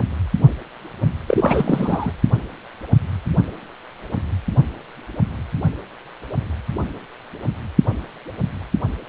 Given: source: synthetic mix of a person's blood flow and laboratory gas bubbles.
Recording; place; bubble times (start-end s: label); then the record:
Doppler ultrasound of blood flow; precordium
1.27-2.12 s: bubbles
From the record:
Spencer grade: 1 (occasional bubble signal discernible with the cardiac motion signal, with majority of cardiac periods free of bubbles); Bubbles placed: anywhere in the cardiac cycle